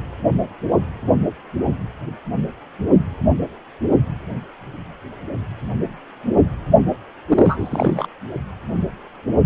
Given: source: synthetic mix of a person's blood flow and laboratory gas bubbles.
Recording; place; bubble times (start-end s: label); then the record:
Doppler ultrasound of blood flow; precordium
7.28-8.07 s: bubbles
From the record:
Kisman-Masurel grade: 212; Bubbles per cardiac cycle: several, 3 to 8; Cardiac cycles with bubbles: 1 to 10%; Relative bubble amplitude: moderate (0.250 to 0.450); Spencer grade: 1 (occasional bubble signal discernible with the cardiac motion signal, with majority of cardiac periods free of bubbles); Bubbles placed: only in the low amplitude regions of the cardiac cycle